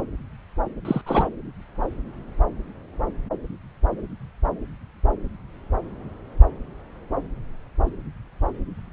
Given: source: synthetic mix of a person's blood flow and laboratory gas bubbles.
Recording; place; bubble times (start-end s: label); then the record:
Doppler ultrasound of blood flow; subclavian vein
0.85-1.01 s: bubbles
1.06-1.28 s: bubbles
From the record:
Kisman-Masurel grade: 212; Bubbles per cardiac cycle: several, 3 to 8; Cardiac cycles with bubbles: 1 to 10%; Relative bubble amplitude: moderate (0.250 to 0.450); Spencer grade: 1 (occasional bubble signal discernible with the cardiac motion signal, with majority of cardiac periods free of bubbles); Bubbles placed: anywhere in the cardiac cycle